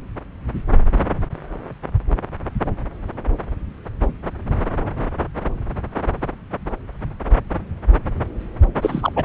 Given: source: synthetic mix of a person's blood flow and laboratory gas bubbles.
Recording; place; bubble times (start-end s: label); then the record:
Doppler ultrasound of blood flow; subclavian vein
8.81-9.12 s: bubbles
9.16-9.24 s: bubbles
From the record:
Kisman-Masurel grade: 213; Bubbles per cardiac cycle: several, 3 to 8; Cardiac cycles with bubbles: 1 to 10%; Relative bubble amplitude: loud (0.450 to 0.775); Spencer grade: 1 (occasional bubble signal discernible with the cardiac motion signal, with majority of cardiac periods free of bubbles); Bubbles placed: anywhere in the cardiac cycle